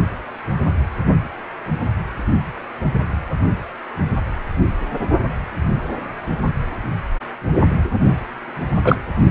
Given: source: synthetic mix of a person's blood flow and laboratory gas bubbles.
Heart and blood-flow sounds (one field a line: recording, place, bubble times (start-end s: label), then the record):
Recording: Doppler ultrasound of blood flow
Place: precordium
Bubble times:
8.84-8.96 s: bubbles
From the record:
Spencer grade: 2 (many but less than half of the cardiac periods contain bubble signals, singularly or in groups)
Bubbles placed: only in the low amplitude regions of the cardiac cycle